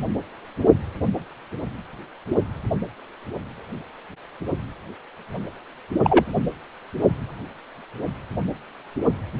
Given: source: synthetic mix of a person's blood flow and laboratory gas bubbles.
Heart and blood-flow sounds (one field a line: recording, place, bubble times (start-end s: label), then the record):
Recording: Doppler ultrasound of blood flow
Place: precordium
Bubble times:
6.04-6.25 s: bubbles
From the record:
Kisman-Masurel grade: 113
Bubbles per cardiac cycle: 1 to 2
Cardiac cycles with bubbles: 1 to 10%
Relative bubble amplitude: loud (0.450 to 0.775)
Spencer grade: 1 (occasional bubble signal discernible with the cardiac motion signal, with majority of cardiac periods free of bubbles)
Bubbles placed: anywhere in the cardiac cycle